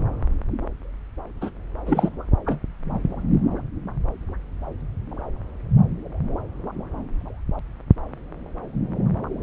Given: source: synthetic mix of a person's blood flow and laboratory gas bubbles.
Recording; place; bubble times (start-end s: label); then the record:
Doppler ultrasound of blood flow; subclavian vein
1.41-1.50 s: bubbles
1.86-2.09 s: bubbles
2.46-2.60 s: bubbles
From the record:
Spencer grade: 1 (occasional bubble signal discernible with the cardiac motion signal, with majority of cardiac periods free of bubbles); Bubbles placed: anywhere in the cardiac cycle